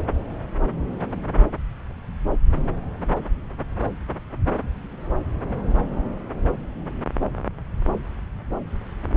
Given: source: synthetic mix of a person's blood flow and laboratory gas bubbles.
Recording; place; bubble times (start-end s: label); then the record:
Doppler ultrasound of blood flow; subclavian vein
no bubbles
From the record:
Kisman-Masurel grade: 000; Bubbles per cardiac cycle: 0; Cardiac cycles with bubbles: 0%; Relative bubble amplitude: no bubbles discernible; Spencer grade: 0 (complete lack of bubble signals)